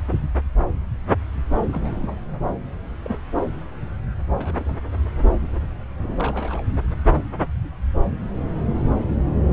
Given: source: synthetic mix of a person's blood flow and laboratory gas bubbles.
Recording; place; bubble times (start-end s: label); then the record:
Doppler ultrasound of blood flow; subclavian vein
1.69-2.14 s: bubbles
3.03-3.16 s: bubbles
4.29-4.76 s: bubbles
5.41-5.66 s: bubbles
6.03-6.75 s: bubbles
From the record:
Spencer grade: 2 (many but less than half of the cardiac periods contain bubble signals, singularly or in groups); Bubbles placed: anywhere in the cardiac cycle